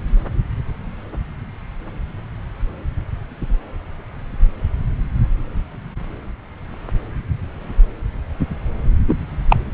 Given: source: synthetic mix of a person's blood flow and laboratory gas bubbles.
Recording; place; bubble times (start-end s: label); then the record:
Doppler ultrasound of blood flow; subclavian vein
9.07-9.15 s: bubbles
9.49-9.56 s: bubbles
From the record:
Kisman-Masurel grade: 113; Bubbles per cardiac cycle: 1 to 2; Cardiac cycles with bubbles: 1 to 10%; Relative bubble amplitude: loud (0.450 to 0.775); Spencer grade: 1 (occasional bubble signal discernible with the cardiac motion signal, with majority of cardiac periods free of bubbles); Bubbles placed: anywhere in the cardiac cycle